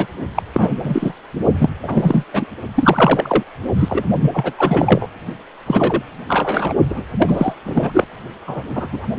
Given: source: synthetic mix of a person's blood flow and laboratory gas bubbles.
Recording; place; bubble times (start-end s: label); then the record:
Doppler ultrasound of blood flow; precordium
0.00-0.07 s: bubbles
0.34-0.43 s: bubbles
0.54-0.75 s: bubbles
0.82-1.12 s: bubbles
1.54-1.70 s: bubbles
1.83-2.24 s: bubbles
2.33-2.46 s: bubbles
2.75-3.44 s: bubbles
3.74-4.04 s: bubbles
4.21-4.54 s: bubbles
4.57-5.07 s: bubbles
5.67-6.03 s: bubbles
6.28-6.74 s: bubbles
6.89-7.07 s: bubbles
7.19-7.54 s: bubbles
7.64-8.05 s: bubbles
8.46-8.63 s: bubbles
8.75-8.88 s: bubbles
8.92-9.06 s: bubbles
From the record:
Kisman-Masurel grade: 333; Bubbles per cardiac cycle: rolling drumbeat, 9 or more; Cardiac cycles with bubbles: 50 to 99%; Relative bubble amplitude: loud (0.450 to 0.775); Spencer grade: 3 (all of the cardiac periods contain showers or single bubble signals, but not dominating or overriding the cardiac motion signals); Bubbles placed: only in the low amplitude regions of the cardiac cycle